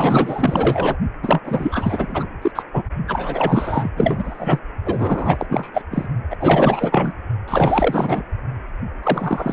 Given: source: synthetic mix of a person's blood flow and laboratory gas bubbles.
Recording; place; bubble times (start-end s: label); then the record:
Doppler ultrasound of blood flow; precordium
0.00-0.97 s: bubbles
1.23-2.26 s: bubbles
2.42-2.51 s: bubbles
2.55-2.62 s: bubbles
2.73-2.82 s: bubbles
3.07-3.90 s: bubbles
3.96-4.59 s: bubbles
4.85-5.46 s: bubbles
5.49-5.70 s: bubbles
5.74-5.82 s: bubbles
5.91-6.08 s: bubbles
6.31-6.37 s: bubbles
6.40-7.14 s: bubbles
7.48-8.23 s: bubbles
9.03-9.53 s: bubbles
From the record:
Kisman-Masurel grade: 444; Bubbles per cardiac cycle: continuous sound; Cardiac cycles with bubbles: 100%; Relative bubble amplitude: maximal (0.775 to 0.999); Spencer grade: 4 (maximum detectable bubble signal sounding continuously throughout systole and diastole of every cardiac period, and overriding the amplitude of the normal cardiac signals); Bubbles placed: only in the low amplitude regions of the cardiac cycle